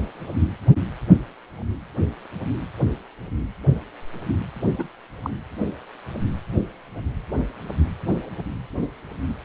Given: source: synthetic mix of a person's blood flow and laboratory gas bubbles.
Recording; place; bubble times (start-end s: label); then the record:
Doppler ultrasound of blood flow; precordium
4.78-4.88 s: bubbles
5.22-5.30 s: bubbles
From the record:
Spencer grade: 1 (occasional bubble signal discernible with the cardiac motion signal, with majority of cardiac periods free of bubbles); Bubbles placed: anywhere in the cardiac cycle